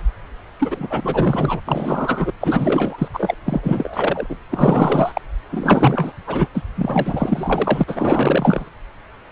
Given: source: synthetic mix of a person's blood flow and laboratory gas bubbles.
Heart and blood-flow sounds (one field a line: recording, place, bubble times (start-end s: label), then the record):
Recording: Doppler ultrasound of blood flow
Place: subclavian vein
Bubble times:
0.59-1.60 s: bubbles
1.67-2.33 s: bubbles
2.40-3.08 s: bubbles
3.14-3.35 s: bubbles
3.45-4.38 s: bubbles
4.51-5.21 s: bubbles
5.50-6.13 s: bubbles
6.27-6.48 s: bubbles
6.54-6.63 s: bubbles
6.75-7.84 s: bubbles
7.87-8.70 s: bubbles
From the record:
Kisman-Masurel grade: 444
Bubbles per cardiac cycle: continuous sound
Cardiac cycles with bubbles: 100%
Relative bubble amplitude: maximal (0.775 to 0.999)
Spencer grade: 4 (maximum detectable bubble signal sounding continuously throughout systole and diastole of every cardiac period, and overriding the amplitude of the normal cardiac signals)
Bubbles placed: anywhere in the cardiac cycle